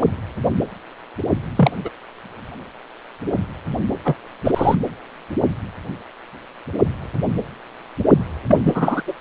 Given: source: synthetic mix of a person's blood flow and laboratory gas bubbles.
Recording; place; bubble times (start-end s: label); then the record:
Doppler ultrasound of blood flow; precordium
1.56-1.71 s: bubbles
1.84-1.89 s: bubbles
4.04-4.15 s: bubbles
4.44-4.51 s: bubbles
4.56-4.75 s: bubbles
8.46-8.56 s: bubbles
8.65-9.02 s: bubbles
9.06-9.13 s: bubbles
From the record:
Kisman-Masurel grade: 223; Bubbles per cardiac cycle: several, 3 to 8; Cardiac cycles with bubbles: 10 to 50%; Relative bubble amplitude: loud (0.450 to 0.775); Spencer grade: 2 (many but less than half of the cardiac periods contain bubble signals, singularly or in groups); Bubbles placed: anywhere in the cardiac cycle